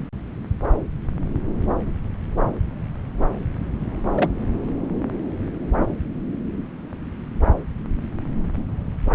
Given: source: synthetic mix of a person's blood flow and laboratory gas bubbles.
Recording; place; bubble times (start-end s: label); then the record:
Doppler ultrasound of blood flow; subclavian vein
4.14-4.31 s: bubbles
From the record:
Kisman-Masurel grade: 112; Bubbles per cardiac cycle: 1 to 2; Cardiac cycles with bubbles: 1 to 10%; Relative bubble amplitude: moderate (0.250 to 0.450); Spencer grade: 1 (occasional bubble signal discernible with the cardiac motion signal, with majority of cardiac periods free of bubbles); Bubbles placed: anywhere in the cardiac cycle